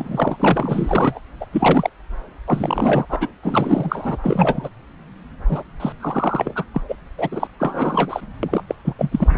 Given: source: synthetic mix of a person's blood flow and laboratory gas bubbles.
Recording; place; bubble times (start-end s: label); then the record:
Doppler ultrasound of blood flow; subclavian vein
0.00-0.37 s: bubbles
0.39-1.19 s: bubbles
1.41-1.45 s: bubbles
1.52-1.90 s: bubbles
2.48-3.05 s: bubbles
3.09-3.27 s: bubbles
3.43-4.17 s: bubbles
4.24-4.68 s: bubbles
5.49-5.62 s: bubbles
5.79-5.92 s: bubbles
6.00-6.64 s: bubbles
6.74-6.81 s: bubbles
6.88-6.96 s: bubbles
7.17-7.47 s: bubbles
7.59-8.21 s: bubbles
8.43-8.63 s: bubbles
8.69-8.74 s: bubbles
8.85-8.94 s: bubbles
8.98-9.09 s: bubbles
9.12-9.38 s: bubbles
From the record:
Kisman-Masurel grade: 342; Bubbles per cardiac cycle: rolling drumbeat, 9 or more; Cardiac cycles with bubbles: 100%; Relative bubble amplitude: moderate (0.250 to 0.450); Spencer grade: 3 (all of the cardiac periods contain showers or single bubble signals, but not dominating or overriding the cardiac motion signals); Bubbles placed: anywhere in the cardiac cycle